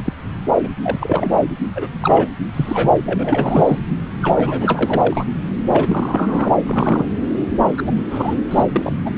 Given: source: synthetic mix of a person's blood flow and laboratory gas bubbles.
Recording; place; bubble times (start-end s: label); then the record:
Doppler ultrasound of blood flow; subclavian vein
0.00-0.13 s: bubbles
0.64-0.69 s: bubbles
0.83-1.30 s: bubbles
1.75-1.90 s: bubbles
2.01-2.29 s: bubbles
2.53-2.94 s: bubbles
3.05-3.79 s: bubbles
4.21-5.25 s: bubbles
5.69-6.49 s: bubbles
6.62-7.07 s: bubbles
7.77-7.83 s: bubbles
7.87-7.94 s: bubbles
8.10-8.35 s: bubbles
8.50-8.64 s: bubbles
8.72-8.99 s: bubbles
9.05-9.10 s: bubbles
From the record:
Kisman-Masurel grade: 242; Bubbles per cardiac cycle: several, 3 to 8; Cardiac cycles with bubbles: 100%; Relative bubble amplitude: moderate (0.250 to 0.450); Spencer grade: 3 (all of the cardiac periods contain showers or single bubble signals, but not dominating or overriding the cardiac motion signals); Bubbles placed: anywhere in the cardiac cycle